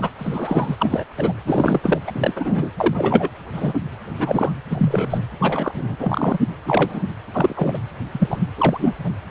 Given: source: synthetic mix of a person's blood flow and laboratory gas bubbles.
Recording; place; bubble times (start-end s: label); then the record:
Doppler ultrasound of blood flow; precordium
0.00-0.09 s: bubbles
0.19-0.76 s: bubbles
0.79-1.04 s: bubbles
1.17-1.33 s: bubbles
1.46-1.80 s: bubbles
1.83-2.00 s: bubbles
2.07-2.12 s: bubbles
2.14-2.72 s: bubbles
2.77-3.28 s: bubbles
3.53-3.79 s: bubbles
4.19-4.52 s: bubbles
4.70-5.23 s: bubbles
5.40-5.71 s: bubbles
5.75-5.96 s: bubbles
6.00-6.39 s: bubbles
6.66-7.05 s: bubbles
7.33-7.79 s: bubbles
8.12-8.44 s: bubbles
8.57-8.94 s: bubbles
9.03-9.10 s: bubbles
From the record:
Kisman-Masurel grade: 243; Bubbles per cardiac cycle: several, 3 to 8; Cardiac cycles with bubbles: 100%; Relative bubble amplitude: loud (0.450 to 0.775); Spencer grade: 3 (all of the cardiac periods contain showers or single bubble signals, but not dominating or overriding the cardiac motion signals); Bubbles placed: anywhere in the cardiac cycle